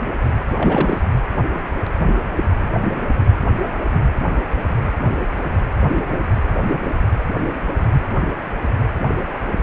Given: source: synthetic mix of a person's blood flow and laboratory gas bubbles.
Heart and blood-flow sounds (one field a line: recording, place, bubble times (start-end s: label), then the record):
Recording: Doppler ultrasound of blood flow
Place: precordium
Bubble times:
0.57-1.03 s: bubbles
From the record:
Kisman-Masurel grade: 212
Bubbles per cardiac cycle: several, 3 to 8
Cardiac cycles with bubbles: 1 to 10%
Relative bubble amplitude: moderate (0.250 to 0.450)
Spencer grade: 1 (occasional bubble signal discernible with the cardiac motion signal, with majority of cardiac periods free of bubbles)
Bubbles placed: anywhere in the cardiac cycle